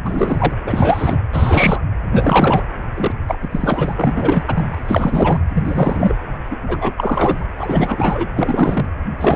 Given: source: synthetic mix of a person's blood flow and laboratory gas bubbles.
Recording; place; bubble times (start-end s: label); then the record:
Doppler ultrasound of blood flow; precordium
0.05-0.54 s: bubbles
0.64-1.21 s: bubbles
1.33-1.81 s: bubbles
2.03-2.67 s: bubbles
2.95-3.15 s: bubbles
3.27-3.39 s: bubbles
3.42-3.49 s: bubbles
3.51-5.38 s: bubbles
5.53-6.13 s: bubbles
6.50-6.57 s: bubbles
6.67-6.92 s: bubbles
6.97-7.46 s: bubbles
7.57-8.29 s: bubbles
8.36-8.90 s: bubbles
9.18-9.36 s: bubbles
From the record:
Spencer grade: 3 (all of the cardiac periods contain showers or single bubble signals, but not dominating or overriding the cardiac motion signals); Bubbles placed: anywhere in the cardiac cycle